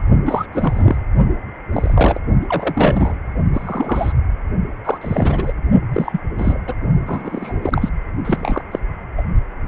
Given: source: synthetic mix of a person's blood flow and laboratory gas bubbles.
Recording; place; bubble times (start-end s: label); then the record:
Doppler ultrasound of blood flow; precordium
0.25-0.46 s: bubbles
0.53-0.96 s: bubbles
1.73-2.20 s: bubbles
2.41-2.47 s: bubbles
2.49-3.16 s: bubbles
3.54-4.12 s: bubbles
4.85-4.98 s: bubbles
5.01-5.53 s: bubbles
5.92-6.21 s: bubbles
6.38-6.60 s: bubbles
6.67-6.75 s: bubbles
7.06-7.59 s: bubbles
7.62-7.89 s: bubbles
8.25-8.62 s: bubbles
8.71-8.79 s: bubbles
9.17-9.22 s: bubbles
From the record:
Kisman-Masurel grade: 242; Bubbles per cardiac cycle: several, 3 to 8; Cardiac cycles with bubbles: 100%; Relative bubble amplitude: moderate (0.250 to 0.450); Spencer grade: 3 (all of the cardiac periods contain showers or single bubble signals, but not dominating or overriding the cardiac motion signals); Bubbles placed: only in the low amplitude regions of the cardiac cycle